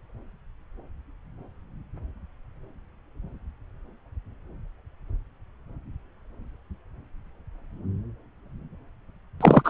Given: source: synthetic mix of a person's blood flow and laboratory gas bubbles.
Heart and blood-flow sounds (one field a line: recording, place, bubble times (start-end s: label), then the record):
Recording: Doppler ultrasound of blood flow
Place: subclavian vein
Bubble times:
9.40-9.70 s: bubbles
From the record:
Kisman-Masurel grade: 213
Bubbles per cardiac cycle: several, 3 to 8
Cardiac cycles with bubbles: 1 to 10%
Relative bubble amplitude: loud (0.450 to 0.775)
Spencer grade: 1 (occasional bubble signal discernible with the cardiac motion signal, with majority of cardiac periods free of bubbles)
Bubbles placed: anywhere in the cardiac cycle